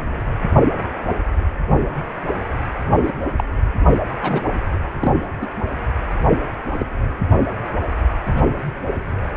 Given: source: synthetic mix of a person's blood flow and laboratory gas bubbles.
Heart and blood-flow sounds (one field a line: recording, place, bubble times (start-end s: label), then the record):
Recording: Doppler ultrasound of blood flow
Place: precordium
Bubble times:
3.02-3.12 s: bubbles
3.38-3.44 s: bubbles
4.21-4.42 s: bubbles
5.00-5.12 s: bubbles
5.41-5.46 s: bubbles
6.29-6.39 s: bubbles
6.73-6.86 s: bubbles
8.26-8.47 s: bubbles
From the record:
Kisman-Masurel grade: 122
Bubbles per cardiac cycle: 1 to 2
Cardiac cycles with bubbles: 10 to 50%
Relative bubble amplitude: moderate (0.250 to 0.450)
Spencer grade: 2 (many but less than half of the cardiac periods contain bubble signals, singularly or in groups)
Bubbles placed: anywhere in the cardiac cycle